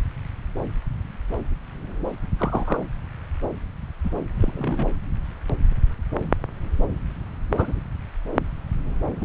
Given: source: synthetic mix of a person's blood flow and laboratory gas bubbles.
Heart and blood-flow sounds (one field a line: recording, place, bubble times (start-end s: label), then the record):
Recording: Doppler ultrasound of blood flow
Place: subclavian vein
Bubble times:
2.38-2.83 s: bubbles
4.04-4.10 s: bubbles
4.35-4.52 s: bubbles
4.57-4.87 s: bubbles
7.57-7.80 s: bubbles
9.21-9.25 s: bubbles
From the record:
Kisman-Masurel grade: 122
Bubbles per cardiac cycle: 1 to 2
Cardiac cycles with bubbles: 10 to 50%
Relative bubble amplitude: moderate (0.250 to 0.450)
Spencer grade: 2 (many but less than half of the cardiac periods contain bubble signals, singularly or in groups)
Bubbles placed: anywhere in the cardiac cycle